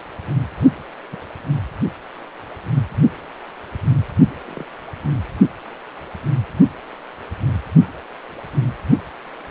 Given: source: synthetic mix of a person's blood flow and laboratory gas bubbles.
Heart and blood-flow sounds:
Doppler ultrasound of blood flow; precordium
1.12-1.24 s: bubbles
1.46-1.65 s: bubbles
4.47-4.65 s: bubbles
From the record:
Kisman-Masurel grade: 121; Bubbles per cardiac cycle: 1 to 2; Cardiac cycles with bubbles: 10 to 50%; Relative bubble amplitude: barely perceptible (0.100 to 0.250); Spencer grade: 2 (many but less than half of the cardiac periods contain bubble signals, singularly or in groups); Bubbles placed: only in the low amplitude regions of the cardiac cycle

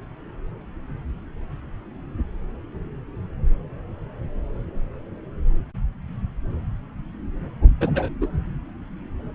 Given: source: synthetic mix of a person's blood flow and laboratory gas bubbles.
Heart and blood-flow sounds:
Doppler ultrasound of blood flow; subclavian vein
7.80-8.09 s: bubbles
8.20-8.27 s: bubbles
From the record:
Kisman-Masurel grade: 113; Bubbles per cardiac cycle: 1 to 2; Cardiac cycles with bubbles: 1 to 10%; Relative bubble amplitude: loud (0.450 to 0.775); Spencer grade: 1 (occasional bubble signal discernible with the cardiac motion signal, with majority of cardiac periods free of bubbles); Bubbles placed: anywhere in the cardiac cycle

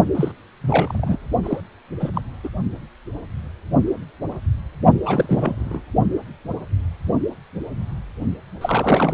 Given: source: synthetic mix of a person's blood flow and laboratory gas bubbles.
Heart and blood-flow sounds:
Doppler ultrasound of blood flow; precordium
0.14-0.32 s: bubbles
0.61-1.17 s: bubbles
1.43-1.60 s: bubbles
1.99-2.10 s: bubbles
2.14-2.21 s: bubbles
2.44-2.49 s: bubbles
5.03-5.81 s: bubbles
8.61-9.14 s: bubbles
From the record:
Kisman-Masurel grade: 232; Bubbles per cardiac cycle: several, 3 to 8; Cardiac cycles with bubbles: 50 to 99%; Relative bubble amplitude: moderate (0.250 to 0.450); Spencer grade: 3 (all of the cardiac periods contain showers or single bubble signals, but not dominating or overriding the cardiac motion signals); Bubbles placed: only in the low amplitude regions of the cardiac cycle

